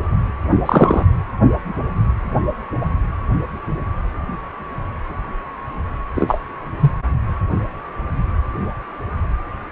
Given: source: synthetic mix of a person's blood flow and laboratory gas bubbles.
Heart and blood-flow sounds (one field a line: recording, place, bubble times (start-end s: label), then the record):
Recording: Doppler ultrasound of blood flow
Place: precordium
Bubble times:
0.66-1.06 s: bubbles
6.14-6.39 s: bubbles
6.80-6.91 s: bubbles
From the record:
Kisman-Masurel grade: 213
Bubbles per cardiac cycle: several, 3 to 8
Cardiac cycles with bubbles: 1 to 10%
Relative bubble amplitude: loud (0.450 to 0.775)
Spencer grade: 1 (occasional bubble signal discernible with the cardiac motion signal, with majority of cardiac periods free of bubbles)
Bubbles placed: anywhere in the cardiac cycle